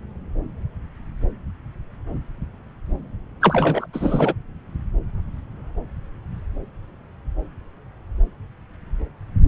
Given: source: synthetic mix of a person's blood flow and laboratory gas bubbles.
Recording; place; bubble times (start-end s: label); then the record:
Doppler ultrasound of blood flow; subclavian vein
3.41-3.86 s: bubbles
3.93-4.33 s: bubbles
From the record:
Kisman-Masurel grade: 223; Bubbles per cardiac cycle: several, 3 to 8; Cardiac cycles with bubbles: 10 to 50%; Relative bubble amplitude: loud (0.450 to 0.775); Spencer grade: 2 (many but less than half of the cardiac periods contain bubble signals, singularly or in groups); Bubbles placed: anywhere in the cardiac cycle